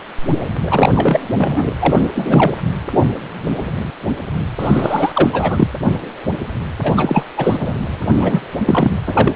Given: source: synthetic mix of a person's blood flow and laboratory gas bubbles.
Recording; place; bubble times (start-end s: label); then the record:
Doppler ultrasound of blood flow; precordium
0.67-1.20 s: bubbles
1.38-1.74 s: bubbles
1.80-2.00 s: bubbles
2.15-2.56 s: bubbles
4.60-5.12 s: bubbles
5.14-5.67 s: bubbles
6.83-6.93 s: bubbles
6.96-7.25 s: bubbles
7.37-7.58 s: bubbles
7.60-7.72 s: bubbles
8.12-8.42 s: bubbles
8.65-8.91 s: bubbles
9.06-9.32 s: bubbles
From the record:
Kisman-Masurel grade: 333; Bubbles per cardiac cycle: rolling drumbeat, 9 or more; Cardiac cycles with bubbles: 50 to 99%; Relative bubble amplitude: loud (0.450 to 0.775); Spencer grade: 3 (all of the cardiac periods contain showers or single bubble signals, but not dominating or overriding the cardiac motion signals); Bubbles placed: anywhere in the cardiac cycle